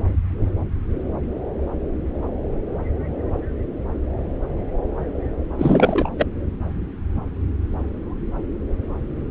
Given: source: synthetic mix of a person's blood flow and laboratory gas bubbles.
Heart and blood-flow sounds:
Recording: Doppler ultrasound of blood flow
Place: subclavian vein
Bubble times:
5.58-6.09 s: bubbles
6.19-6.27 s: bubbles
From the record:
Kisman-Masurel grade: 213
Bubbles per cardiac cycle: several, 3 to 8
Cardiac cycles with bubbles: 1 to 10%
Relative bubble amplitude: loud (0.450 to 0.775)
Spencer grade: 1 (occasional bubble signal discernible with the cardiac motion signal, with majority of cardiac periods free of bubbles)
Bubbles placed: anywhere in the cardiac cycle

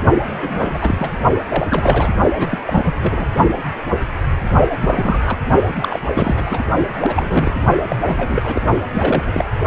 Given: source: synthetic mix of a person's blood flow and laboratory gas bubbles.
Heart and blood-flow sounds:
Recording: Doppler ultrasound of blood flow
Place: precordium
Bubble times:
0.22-1.12 s: bubbles
1.39-1.44 s: bubbles
1.49-2.14 s: bubbles
2.38-2.48 s: bubbles
2.50-2.58 s: bubbles
2.65-3.26 s: bubbles
4.72-4.77 s: bubbles
4.81-5.37 s: bubbles
5.80-6.00 s: bubbles
6.14-6.63 s: bubbles
7.01-7.54 s: bubbles
7.90-7.96 s: bubbles
8.04-8.62 s: bubbles
8.93-9.45 s: bubbles
From the record:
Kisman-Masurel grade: 332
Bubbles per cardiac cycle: rolling drumbeat, 9 or more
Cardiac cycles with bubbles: 50 to 99%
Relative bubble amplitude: moderate (0.250 to 0.450)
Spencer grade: 3 (all of the cardiac periods contain showers or single bubble signals, but not dominating or overriding the cardiac motion signals)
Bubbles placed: only in the low amplitude regions of the cardiac cycle

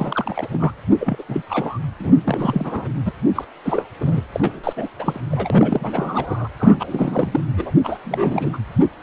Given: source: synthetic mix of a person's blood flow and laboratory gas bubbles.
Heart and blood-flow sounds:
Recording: Doppler ultrasound of blood flow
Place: precordium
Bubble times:
0.00-0.72 s: bubbles
1.00-1.23 s: bubbles
1.28-1.43 s: bubbles
1.50-1.78 s: bubbles
1.99-2.13 s: bubbles
2.24-2.88 s: bubbles
3.05-3.13 s: bubbles
3.34-3.44 s: bubbles
3.64-3.85 s: bubbles
4.00-4.22 s: bubbles
4.32-4.59 s: bubbles
4.63-4.73 s: bubbles
4.76-4.88 s: bubbles
4.99-5.20 s: bubbles
5.31-6.47 s: bubbles
6.59-7.41 s: bubbles
7.57-7.75 s: bubbles
7.83-7.98 s: bubbles
8.04-8.58 s: bubbles
From the record:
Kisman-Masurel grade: 332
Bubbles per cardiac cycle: rolling drumbeat, 9 or more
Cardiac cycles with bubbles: 50 to 99%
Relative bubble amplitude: moderate (0.250 to 0.450)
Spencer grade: 3 (all of the cardiac periods contain showers or single bubble signals, but not dominating or overriding the cardiac motion signals)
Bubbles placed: anywhere in the cardiac cycle

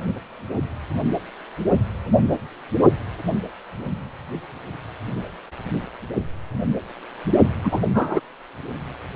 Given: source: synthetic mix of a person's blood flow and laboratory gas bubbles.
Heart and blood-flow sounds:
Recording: Doppler ultrasound of blood flow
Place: precordium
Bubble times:
7.64-7.82 s: bubbles
7.94-8.21 s: bubbles
From the record:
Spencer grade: 1 (occasional bubble signal discernible with the cardiac motion signal, with majority of cardiac periods free of bubbles)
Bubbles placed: only in the low amplitude regions of the cardiac cycle

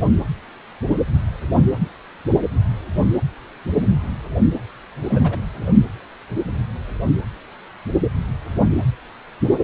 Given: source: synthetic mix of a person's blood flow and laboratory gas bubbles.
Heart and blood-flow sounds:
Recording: Doppler ultrasound of blood flow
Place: precordium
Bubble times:
5.08-5.38 s: bubbles
From the record:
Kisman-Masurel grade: 212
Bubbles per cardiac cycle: several, 3 to 8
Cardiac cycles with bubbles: 1 to 10%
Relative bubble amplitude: moderate (0.250 to 0.450)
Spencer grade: 1 (occasional bubble signal discernible with the cardiac motion signal, with majority of cardiac periods free of bubbles)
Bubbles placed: anywhere in the cardiac cycle

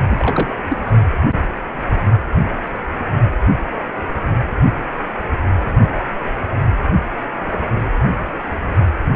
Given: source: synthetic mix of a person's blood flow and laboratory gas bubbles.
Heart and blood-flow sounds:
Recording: Doppler ultrasound of blood flow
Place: precordium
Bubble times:
0.00-0.59 s: bubbles
0.68-0.78 s: bubbles
From the record:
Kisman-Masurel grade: 212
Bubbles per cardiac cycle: several, 3 to 8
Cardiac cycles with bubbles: 1 to 10%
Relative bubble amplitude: moderate (0.250 to 0.450)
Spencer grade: 1 (occasional bubble signal discernible with the cardiac motion signal, with majority of cardiac periods free of bubbles)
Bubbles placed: only in the low amplitude regions of the cardiac cycle

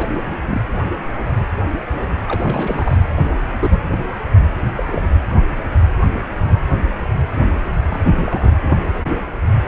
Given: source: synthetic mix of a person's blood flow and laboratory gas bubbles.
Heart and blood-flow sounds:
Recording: Doppler ultrasound of blood flow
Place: precordium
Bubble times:
0.00-0.05 s: bubbles
0.09-0.14 s: bubbles
0.42-0.61 s: bubbles
2.28-2.97 s: bubbles
3.17-3.48 s: bubbles
3.60-3.82 s: bubbles
4.77-4.84 s: bubbles
4.87-5.02 s: bubbles
7.88-8.56 s: bubbles
8.61-8.80 s: bubbles
9.64-9.67 s: bubbles
From the record:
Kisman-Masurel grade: 232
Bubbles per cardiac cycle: several, 3 to 8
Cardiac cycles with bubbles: 50 to 99%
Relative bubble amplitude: moderate (0.250 to 0.450)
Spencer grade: 3 (all of the cardiac periods contain showers or single bubble signals, but not dominating or overriding the cardiac motion signals)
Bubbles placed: anywhere in the cardiac cycle

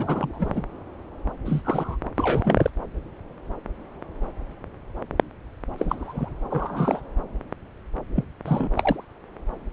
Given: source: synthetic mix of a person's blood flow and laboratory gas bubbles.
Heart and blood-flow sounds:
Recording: Doppler ultrasound of blood flow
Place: subclavian vein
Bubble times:
0.00-0.62 s: bubbles
1.45-1.96 s: bubbles
2.17-2.70 s: bubbles
5.78-6.34 s: bubbles
6.50-7.00 s: bubbles
8.15-8.24 s: bubbles
8.45-9.04 s: bubbles
From the record:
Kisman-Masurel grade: 222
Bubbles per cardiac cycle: several, 3 to 8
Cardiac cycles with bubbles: 10 to 50%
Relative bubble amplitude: moderate (0.250 to 0.450)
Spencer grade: 2 (many but less than half of the cardiac periods contain bubble signals, singularly or in groups)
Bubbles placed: anywhere in the cardiac cycle

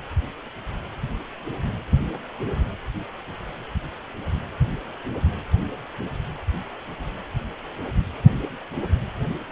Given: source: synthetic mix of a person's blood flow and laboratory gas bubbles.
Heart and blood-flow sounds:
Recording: Doppler ultrasound of blood flow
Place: precordium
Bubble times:
no bubbles
From the record:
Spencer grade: 0 (complete lack of bubble signals)

